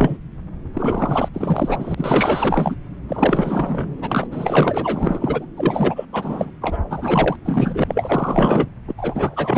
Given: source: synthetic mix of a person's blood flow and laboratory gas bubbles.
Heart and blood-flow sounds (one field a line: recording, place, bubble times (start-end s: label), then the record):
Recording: Doppler ultrasound of blood flow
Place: subclavian vein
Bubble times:
0.00-0.17 s: bubbles
0.73-1.29 s: bubbles
1.33-2.75 s: bubbles
3.08-3.96 s: bubbles
4.00-4.28 s: bubbles
4.31-5.46 s: bubbles
5.56-6.05 s: bubbles
6.12-6.50 s: bubbles
6.61-6.79 s: bubbles
6.90-7.37 s: bubbles
7.45-7.84 s: bubbles
7.88-8.68 s: bubbles
8.87-8.94 s: bubbles
8.97-9.58 s: bubbles
From the record:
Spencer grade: 4 (maximum detectable bubble signal sounding continuously throughout systole and diastole of every cardiac period, and overriding the amplitude of the normal cardiac signals)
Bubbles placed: anywhere in the cardiac cycle